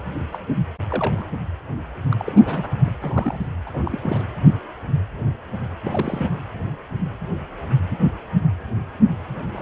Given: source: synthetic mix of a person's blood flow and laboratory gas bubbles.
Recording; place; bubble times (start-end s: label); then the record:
Doppler ultrasound of blood flow; precordium
0.00-0.02 s: bubbles
0.32-0.39 s: bubbles
0.90-1.26 s: bubbles
2.11-2.32 s: bubbles
2.36-2.71 s: bubbles
2.84-2.92 s: bubbles
3.02-3.49 s: bubbles
3.66-3.70 s: bubbles
3.73-3.81 s: bubbles
3.85-4.25 s: bubbles
5.84-6.31 s: bubbles
9.50-9.62 s: bubbles
From the record:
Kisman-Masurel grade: 221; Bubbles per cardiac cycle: several, 3 to 8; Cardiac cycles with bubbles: 10 to 50%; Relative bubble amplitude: barely perceptible (0.100 to 0.250); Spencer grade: 2 (many but less than half of the cardiac periods contain bubble signals, singularly or in groups); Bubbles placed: anywhere in the cardiac cycle